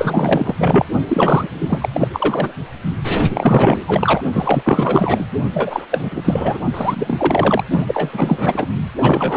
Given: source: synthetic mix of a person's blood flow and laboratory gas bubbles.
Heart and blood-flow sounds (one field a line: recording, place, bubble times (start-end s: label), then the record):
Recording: Doppler ultrasound of blood flow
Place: precordium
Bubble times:
0.00-0.54 s: bubbles
0.57-0.84 s: bubbles
1.08-1.88 s: bubbles
1.94-2.08 s: bubbles
2.12-2.53 s: bubbles
3.29-4.21 s: bubbles
4.32-5.24 s: bubbles
5.54-5.85 s: bubbles
5.90-6.58 s: bubbles
6.73-7.63 s: bubbles
7.71-8.67 s: bubbles
8.97-9.37 s: bubbles
From the record:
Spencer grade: 4 (maximum detectable bubble signal sounding continuously throughout systole and diastole of every cardiac period, and overriding the amplitude of the normal cardiac signals)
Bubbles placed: only in the low amplitude regions of the cardiac cycle